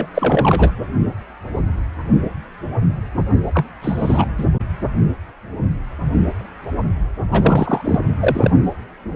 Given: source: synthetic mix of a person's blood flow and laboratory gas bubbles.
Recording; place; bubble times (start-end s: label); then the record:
Doppler ultrasound of blood flow; precordium
0.00-0.07 s: bubbles
0.14-0.71 s: bubbles
3.54-3.65 s: bubbles
3.82-4.25 s: bubbles
4.38-4.45 s: bubbles
7.32-7.82 s: bubbles
7.84-8.00 s: bubbles
8.19-8.50 s: bubbles
From the record:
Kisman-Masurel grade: 223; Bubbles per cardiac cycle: several, 3 to 8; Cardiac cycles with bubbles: 10 to 50%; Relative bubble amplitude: loud (0.450 to 0.775); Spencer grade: 2 (many but less than half of the cardiac periods contain bubble signals, singularly or in groups); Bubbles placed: only in the low amplitude regions of the cardiac cycle